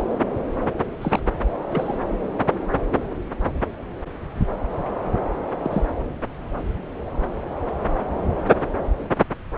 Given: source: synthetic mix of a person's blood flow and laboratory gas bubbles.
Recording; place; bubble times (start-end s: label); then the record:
Doppler ultrasound of blood flow; subclavian vein
0.00-0.02 s: bubbles
1.01-1.20 s: bubbles
1.70-1.96 s: bubbles
5.63-5.85 s: bubbles
From the record:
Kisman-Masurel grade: 121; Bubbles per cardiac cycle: 1 to 2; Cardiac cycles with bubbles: 10 to 50%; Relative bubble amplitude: barely perceptible (0.100 to 0.250); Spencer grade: 2 (many but less than half of the cardiac periods contain bubble signals, singularly or in groups); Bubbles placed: anywhere in the cardiac cycle